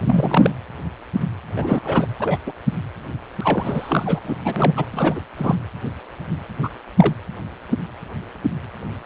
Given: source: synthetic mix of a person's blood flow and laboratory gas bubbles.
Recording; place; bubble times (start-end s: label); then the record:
Doppler ultrasound of blood flow; precordium
0.01-0.50 s: bubbles
1.56-1.81 s: bubbles
1.83-2.08 s: bubbles
2.19-2.40 s: bubbles
2.46-2.54 s: bubbles
3.41-4.20 s: bubbles
4.24-4.36 s: bubbles
4.44-4.74 s: bubbles
4.76-4.86 s: bubbles
4.92-5.21 s: bubbles
5.37-5.55 s: bubbles
6.62-6.69 s: bubbles
6.96-7.13 s: bubbles
From the record:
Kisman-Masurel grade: 233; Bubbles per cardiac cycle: several, 3 to 8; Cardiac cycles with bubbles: 50 to 99%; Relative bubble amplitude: loud (0.450 to 0.775); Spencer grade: 3 (all of the cardiac periods contain showers or single bubble signals, but not dominating or overriding the cardiac motion signals); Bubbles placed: anywhere in the cardiac cycle